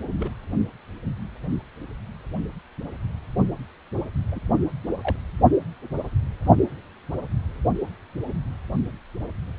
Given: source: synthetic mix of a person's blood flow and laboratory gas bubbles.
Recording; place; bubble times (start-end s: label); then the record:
Doppler ultrasound of blood flow; precordium
0.20-0.30 s: bubbles
4.32-4.41 s: bubbles
5.03-5.16 s: bubbles
From the record:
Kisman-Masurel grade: 121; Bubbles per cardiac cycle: 1 to 2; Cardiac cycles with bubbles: 10 to 50%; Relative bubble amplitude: barely perceptible (0.100 to 0.250); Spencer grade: 2 (many but less than half of the cardiac periods contain bubble signals, singularly or in groups); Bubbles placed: only in the low amplitude regions of the cardiac cycle